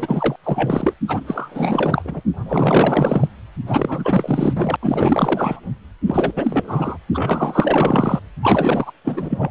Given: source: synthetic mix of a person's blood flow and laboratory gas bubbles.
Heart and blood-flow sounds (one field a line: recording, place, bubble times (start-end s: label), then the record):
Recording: Doppler ultrasound of blood flow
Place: precordium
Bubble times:
0.00-0.36 s: bubbles
0.43-0.94 s: bubbles
1.08-1.21 s: bubbles
1.26-2.02 s: bubbles
2.04-2.21 s: bubbles
2.36-3.27 s: bubbles
3.67-4.76 s: bubbles
4.81-5.60 s: bubbles
6.07-6.97 s: bubbles
7.14-8.21 s: bubbles
8.43-8.91 s: bubbles
9.04-9.50 s: bubbles
From the record:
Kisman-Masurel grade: 444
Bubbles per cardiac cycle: continuous sound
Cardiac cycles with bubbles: 100%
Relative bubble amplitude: maximal (0.775 to 0.999)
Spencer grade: 4 (maximum detectable bubble signal sounding continuously throughout systole and diastole of every cardiac period, and overriding the amplitude of the normal cardiac signals)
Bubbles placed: anywhere in the cardiac cycle